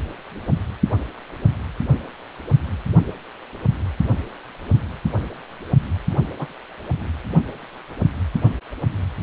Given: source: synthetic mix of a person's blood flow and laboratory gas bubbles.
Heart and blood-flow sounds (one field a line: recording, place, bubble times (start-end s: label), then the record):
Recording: Doppler ultrasound of blood flow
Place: precordium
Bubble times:
6.38-6.53 s: bubbles
From the record:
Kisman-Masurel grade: 112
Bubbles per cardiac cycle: 1 to 2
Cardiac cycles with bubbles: 1 to 10%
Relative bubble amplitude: moderate (0.250 to 0.450)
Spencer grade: 1 (occasional bubble signal discernible with the cardiac motion signal, with majority of cardiac periods free of bubbles)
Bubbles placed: only in the low amplitude regions of the cardiac cycle